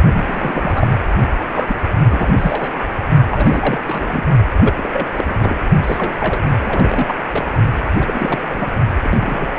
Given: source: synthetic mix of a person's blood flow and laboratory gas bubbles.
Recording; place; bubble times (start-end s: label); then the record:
Doppler ultrasound of blood flow; precordium
0.14-0.90 s: bubbles
1.54-1.75 s: bubbles
2.11-2.34 s: bubbles
2.38-2.81 s: bubbles
3.30-4.24 s: bubbles
4.56-4.74 s: bubbles
4.77-4.89 s: bubbles
4.92-5.07 s: bubbles
5.14-5.24 s: bubbles
5.29-5.57 s: bubbles
5.83-6.47 s: bubbles
6.56-7.15 s: bubbles
7.33-7.45 s: bubbles
7.99-8.38 s: bubbles
8.49-8.69 s: bubbles
9.03-9.52 s: bubbles
9.55-9.59 s: bubbles
From the record:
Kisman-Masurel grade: 332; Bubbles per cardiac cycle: rolling drumbeat, 9 or more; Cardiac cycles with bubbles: 50 to 99%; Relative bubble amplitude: moderate (0.250 to 0.450); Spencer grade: 3 (all of the cardiac periods contain showers or single bubble signals, but not dominating or overriding the cardiac motion signals); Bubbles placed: only in the low amplitude regions of the cardiac cycle